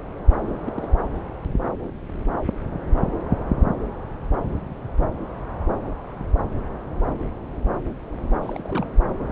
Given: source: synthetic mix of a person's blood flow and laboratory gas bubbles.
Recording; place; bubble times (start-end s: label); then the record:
Doppler ultrasound of blood flow; subclavian vein
0.42-0.55 s: bubbles
0.66-0.71 s: bubbles
0.77-0.88 s: bubbles
8.43-8.88 s: bubbles
From the record:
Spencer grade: 1 (occasional bubble signal discernible with the cardiac motion signal, with majority of cardiac periods free of bubbles); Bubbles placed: anywhere in the cardiac cycle